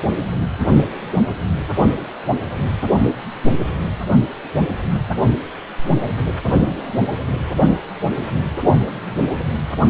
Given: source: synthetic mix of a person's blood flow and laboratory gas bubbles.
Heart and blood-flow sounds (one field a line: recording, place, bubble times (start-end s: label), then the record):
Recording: Doppler ultrasound of blood flow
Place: precordium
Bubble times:
0.07-0.13 s: bubbles
0.40-0.48 s: bubbles
From the record:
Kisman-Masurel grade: 111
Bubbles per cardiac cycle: 1 to 2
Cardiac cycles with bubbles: 1 to 10%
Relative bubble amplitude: barely perceptible (0.100 to 0.250)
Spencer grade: 1 (occasional bubble signal discernible with the cardiac motion signal, with majority of cardiac periods free of bubbles)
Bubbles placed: only in the low amplitude regions of the cardiac cycle